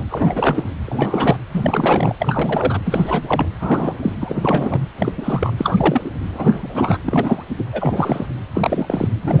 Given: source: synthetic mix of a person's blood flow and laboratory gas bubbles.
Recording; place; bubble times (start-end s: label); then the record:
Doppler ultrasound of blood flow; precordium
0.00-0.04 s: bubbles
0.10-0.70 s: bubbles
0.86-1.37 s: bubbles
1.52-2.15 s: bubbles
2.19-2.79 s: bubbles
2.85-3.49 s: bubbles
3.60-4.14 s: bubbles
4.21-4.81 s: bubbles
4.96-5.12 s: bubbles
5.17-5.53 s: bubbles
5.58-6.10 s: bubbles
6.31-6.98 s: bubbles
7.05-7.43 s: bubbles
7.58-7.64 s: bubbles
7.73-8.26 s: bubbles
8.53-9.09 s: bubbles
9.22-9.40 s: bubbles
From the record:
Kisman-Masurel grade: 343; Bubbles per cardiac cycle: rolling drumbeat, 9 or more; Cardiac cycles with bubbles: 100%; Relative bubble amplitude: loud (0.450 to 0.775); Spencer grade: 3 (all of the cardiac periods contain showers or single bubble signals, but not dominating or overriding the cardiac motion signals); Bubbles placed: anywhere in the cardiac cycle